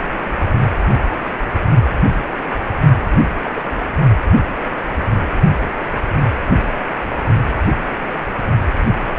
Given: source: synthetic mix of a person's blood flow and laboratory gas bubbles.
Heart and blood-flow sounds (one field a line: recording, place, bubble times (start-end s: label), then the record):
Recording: Doppler ultrasound of blood flow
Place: precordium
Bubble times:
3.44-3.68 s: bubbles
From the record:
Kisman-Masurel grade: 122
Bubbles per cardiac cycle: 1 to 2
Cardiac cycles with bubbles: 10 to 50%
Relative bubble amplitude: moderate (0.250 to 0.450)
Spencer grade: 2 (many but less than half of the cardiac periods contain bubble signals, singularly or in groups)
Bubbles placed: only in the low amplitude regions of the cardiac cycle